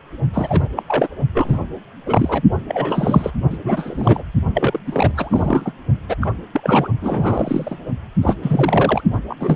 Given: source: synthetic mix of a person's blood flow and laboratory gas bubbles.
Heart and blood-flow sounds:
Doppler ultrasound of blood flow; precordium
0.33-0.69 s: bubbles
0.76-0.83 s: bubbles
0.88-1.08 s: bubbles
1.34-1.58 s: bubbles
2.06-2.43 s: bubbles
2.68-3.31 s: bubbles
3.50-3.57 s: bubbles
3.64-4.23 s: bubbles
4.54-4.78 s: bubbles
4.86-5.11 s: bubbles
5.15-5.72 s: bubbles
6.08-6.15 s: bubbles
6.21-6.33 s: bubbles
6.53-6.88 s: bubbles
7.01-7.77 s: bubbles
8.21-8.35 s: bubbles
8.43-9.02 s: bubbles
9.12-9.19 s: bubbles
9.29-9.35 s: bubbles
9.39-9.56 s: bubbles
From the record:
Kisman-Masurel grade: 342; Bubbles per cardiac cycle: rolling drumbeat, 9 or more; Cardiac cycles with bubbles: 100%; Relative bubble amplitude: moderate (0.250 to 0.450); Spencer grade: 3 (all of the cardiac periods contain showers or single bubble signals, but not dominating or overriding the cardiac motion signals); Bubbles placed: only in the low amplitude regions of the cardiac cycle

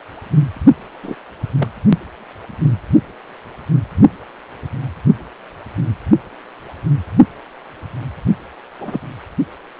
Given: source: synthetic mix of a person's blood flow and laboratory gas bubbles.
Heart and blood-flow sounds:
Doppler ultrasound of blood flow; precordium
1.02-1.15 s: bubbles
1.59-1.69 s: bubbles
8.80-9.01 s: bubbles
From the record:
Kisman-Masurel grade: 122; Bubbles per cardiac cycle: 1 to 2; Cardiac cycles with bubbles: 10 to 50%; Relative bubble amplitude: moderate (0.250 to 0.450); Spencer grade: 2 (many but less than half of the cardiac periods contain bubble signals, singularly or in groups); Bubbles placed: only in the low amplitude regions of the cardiac cycle

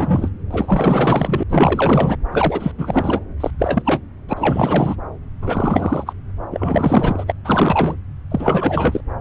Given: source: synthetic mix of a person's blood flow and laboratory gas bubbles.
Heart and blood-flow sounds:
Doppler ultrasound of blood flow; subclavian vein
0.00-0.29 s: bubbles
0.51-1.43 s: bubbles
1.49-2.17 s: bubbles
2.31-2.72 s: bubbles
2.77-3.20 s: bubbles
3.40-3.50 s: bubbles
3.58-4.01 s: bubbles
4.28-4.96 s: bubbles
5.42-6.13 s: bubbles
6.50-7.32 s: bubbles
7.44-7.96 s: bubbles
8.30-9.00 s: bubbles
From the record:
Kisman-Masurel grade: 444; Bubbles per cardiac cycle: continuous sound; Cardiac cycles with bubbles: 100%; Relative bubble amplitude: maximal (0.775 to 0.999); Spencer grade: 4 (maximum detectable bubble signal sounding continuously throughout systole and diastole of every cardiac period, and overriding the amplitude of the normal cardiac signals); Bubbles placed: anywhere in the cardiac cycle

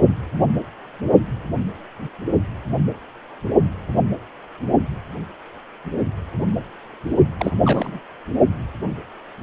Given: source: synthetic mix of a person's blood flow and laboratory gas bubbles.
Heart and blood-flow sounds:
Doppler ultrasound of blood flow; precordium
7.40-7.56 s: bubbles
7.64-8.00 s: bubbles
From the record:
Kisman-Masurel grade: 221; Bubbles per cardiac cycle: several, 3 to 8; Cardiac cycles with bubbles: 10 to 50%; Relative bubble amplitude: barely perceptible (0.100 to 0.250); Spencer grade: 2 (many but less than half of the cardiac periods contain bubble signals, singularly or in groups); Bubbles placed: only in the low amplitude regions of the cardiac cycle

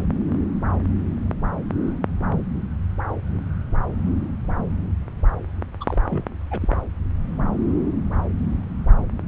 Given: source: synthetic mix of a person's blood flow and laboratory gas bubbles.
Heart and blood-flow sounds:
Doppler ultrasound of blood flow; subclavian vein
5.80-5.97 s: bubbles
6.09-6.25 s: bubbles
6.50-6.80 s: bubbles
From the record:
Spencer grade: 1 (occasional bubble signal discernible with the cardiac motion signal, with majority of cardiac periods free of bubbles); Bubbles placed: anywhere in the cardiac cycle

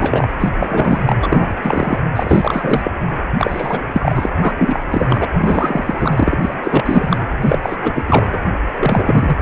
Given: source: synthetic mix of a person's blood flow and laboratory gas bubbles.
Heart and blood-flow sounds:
Doppler ultrasound of blood flow; precordium
0.00-0.26 s: bubbles
0.39-0.50 s: bubbles
0.58-1.16 s: bubbles
1.21-1.53 s: bubbles
1.56-1.99 s: bubbles
2.16-2.81 s: bubbles
2.84-2.91 s: bubbles
3.35-3.84 s: bubbles
3.93-4.31 s: bubbles
4.40-4.52 s: bubbles
4.58-4.80 s: bubbles
4.90-5.29 s: bubbles
5.40-6.38 s: bubbles
6.42-6.54 s: bubbles
6.63-7.21 s: bubbles
7.41-7.58 s: bubbles
7.62-7.76 s: bubbles
7.81-8.38 s: bubbles
8.64-9.36 s: bubbles
From the record:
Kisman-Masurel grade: 343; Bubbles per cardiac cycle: rolling drumbeat, 9 or more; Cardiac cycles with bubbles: 100%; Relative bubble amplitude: loud (0.450 to 0.775); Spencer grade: 3 (all of the cardiac periods contain showers or single bubble signals, but not dominating or overriding the cardiac motion signals); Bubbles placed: anywhere in the cardiac cycle

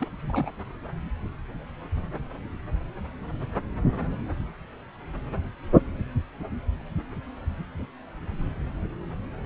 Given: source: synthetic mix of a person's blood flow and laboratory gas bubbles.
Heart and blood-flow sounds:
Doppler ultrasound of blood flow; subclavian vein
0.00-0.51 s: bubbles
From the record:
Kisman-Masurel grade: 211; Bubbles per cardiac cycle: several, 3 to 8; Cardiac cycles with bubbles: 1 to 10%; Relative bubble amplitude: barely perceptible (0.100 to 0.250); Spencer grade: 1 (occasional bubble signal discernible with the cardiac motion signal, with majority of cardiac periods free of bubbles); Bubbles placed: anywhere in the cardiac cycle

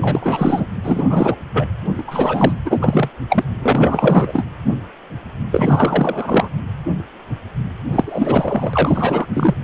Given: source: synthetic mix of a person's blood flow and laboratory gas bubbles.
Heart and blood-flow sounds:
Doppler ultrasound of blood flow; precordium
0.00-0.66 s: bubbles
0.83-1.36 s: bubbles
1.53-1.67 s: bubbles
1.98-2.04 s: bubbles
2.07-2.52 s: bubbles
2.65-2.79 s: bubbles
2.81-3.09 s: bubbles
3.29-3.44 s: bubbles
3.62-4.45 s: bubbles
5.51-6.49 s: bubbles
7.91-9.27 s: bubbles
9.33-9.55 s: bubbles
From the record:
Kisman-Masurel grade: 333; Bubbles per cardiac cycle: rolling drumbeat, 9 or more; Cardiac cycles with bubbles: 50 to 99%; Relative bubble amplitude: loud (0.450 to 0.775); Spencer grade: 3 (all of the cardiac periods contain showers or single bubble signals, but not dominating or overriding the cardiac motion signals); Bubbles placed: anywhere in the cardiac cycle

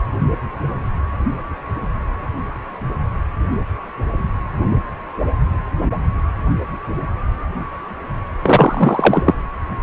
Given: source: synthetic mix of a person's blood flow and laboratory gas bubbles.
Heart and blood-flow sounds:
Doppler ultrasound of blood flow; precordium
8.42-9.34 s: bubbles
From the record:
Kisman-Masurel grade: 213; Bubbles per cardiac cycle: several, 3 to 8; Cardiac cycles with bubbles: 1 to 10%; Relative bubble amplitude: loud (0.450 to 0.775); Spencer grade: 1 (occasional bubble signal discernible with the cardiac motion signal, with majority of cardiac periods free of bubbles); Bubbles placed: anywhere in the cardiac cycle

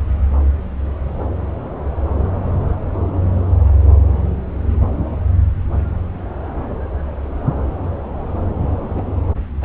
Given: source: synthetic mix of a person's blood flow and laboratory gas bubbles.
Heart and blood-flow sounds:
Doppler ultrasound of blood flow; subclavian vein
8.96-9.02 s: bubbles
9.61-9.65 s: bubbles
From the record:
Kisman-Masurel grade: 212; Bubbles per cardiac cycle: several, 3 to 8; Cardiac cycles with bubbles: 1 to 10%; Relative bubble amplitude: moderate (0.250 to 0.450); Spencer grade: 1 (occasional bubble signal discernible with the cardiac motion signal, with majority of cardiac periods free of bubbles); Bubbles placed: anywhere in the cardiac cycle

